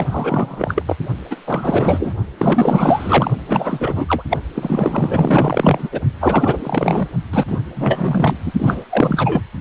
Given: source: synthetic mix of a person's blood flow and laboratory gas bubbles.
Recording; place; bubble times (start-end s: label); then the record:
Doppler ultrasound of blood flow; precordium
0.00-0.05 s: bubbles
0.11-0.82 s: bubbles
0.86-0.96 s: bubbles
1.30-1.36 s: bubbles
1.47-2.13 s: bubbles
2.38-3.31 s: bubbles
3.47-4.23 s: bubbles
4.30-4.39 s: bubbles
4.55-6.00 s: bubbles
6.20-7.08 s: bubbles
7.32-7.58 s: bubbles
7.75-8.37 s: bubbles
8.44-8.53 s: bubbles
8.58-8.83 s: bubbles
8.90-9.41 s: bubbles
From the record:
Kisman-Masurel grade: 444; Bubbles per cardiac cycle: continuous sound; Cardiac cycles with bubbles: 100%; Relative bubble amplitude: maximal (0.775 to 0.999); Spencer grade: 4 (maximum detectable bubble signal sounding continuously throughout systole and diastole of every cardiac period, and overriding the amplitude of the normal cardiac signals); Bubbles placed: only in the low amplitude regions of the cardiac cycle